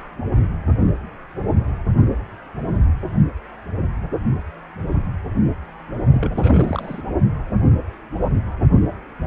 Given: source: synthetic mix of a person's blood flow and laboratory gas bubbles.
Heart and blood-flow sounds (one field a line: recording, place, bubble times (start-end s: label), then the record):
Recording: Doppler ultrasound of blood flow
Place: precordium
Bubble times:
6.11-7.02 s: bubbles
From the record:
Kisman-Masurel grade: 211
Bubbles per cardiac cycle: several, 3 to 8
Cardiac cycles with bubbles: 1 to 10%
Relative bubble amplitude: barely perceptible (0.100 to 0.250)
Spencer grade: 1 (occasional bubble signal discernible with the cardiac motion signal, with majority of cardiac periods free of bubbles)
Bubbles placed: only in the low amplitude regions of the cardiac cycle